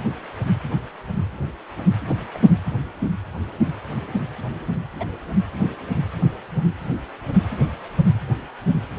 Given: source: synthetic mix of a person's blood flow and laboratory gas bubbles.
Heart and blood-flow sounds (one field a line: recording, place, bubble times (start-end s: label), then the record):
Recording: Doppler ultrasound of blood flow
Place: precordium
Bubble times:
2.34-2.38 s: bubbles
5.00-5.06 s: bubbles
From the record:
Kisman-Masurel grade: 121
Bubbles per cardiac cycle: 1 to 2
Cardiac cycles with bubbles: 10 to 50%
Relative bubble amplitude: barely perceptible (0.100 to 0.250)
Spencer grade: 2 (many but less than half of the cardiac periods contain bubble signals, singularly or in groups)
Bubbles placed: anywhere in the cardiac cycle